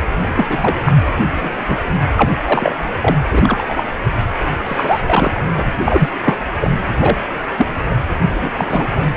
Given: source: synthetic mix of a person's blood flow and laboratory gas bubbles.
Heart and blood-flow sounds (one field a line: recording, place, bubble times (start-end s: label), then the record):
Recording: Doppler ultrasound of blood flow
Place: precordium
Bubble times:
0.19-0.46 s: bubbles
0.49-0.79 s: bubbles
0.85-0.92 s: bubbles
1.35-1.60 s: bubbles
1.67-1.77 s: bubbles
2.17-2.31 s: bubbles
2.44-2.76 s: bubbles
3.01-3.16 s: bubbles
3.32-3.83 s: bubbles
4.66-5.00 s: bubbles
5.06-5.31 s: bubbles
5.35-5.41 s: bubbles
5.54-5.66 s: bubbles
5.84-6.09 s: bubbles
6.25-6.38 s: bubbles
6.60-6.71 s: bubbles
7.00-7.27 s: bubbles
7.58-7.67 s: bubbles
7.90-7.95 s: bubbles
8.41-8.50 s: bubbles
8.57-8.66 s: bubbles
8.69-8.89 s: bubbles
From the record:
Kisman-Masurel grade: 243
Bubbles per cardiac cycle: several, 3 to 8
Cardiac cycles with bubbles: 100%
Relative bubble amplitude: loud (0.450 to 0.775)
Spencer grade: 3 (all of the cardiac periods contain showers or single bubble signals, but not dominating or overriding the cardiac motion signals)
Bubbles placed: anywhere in the cardiac cycle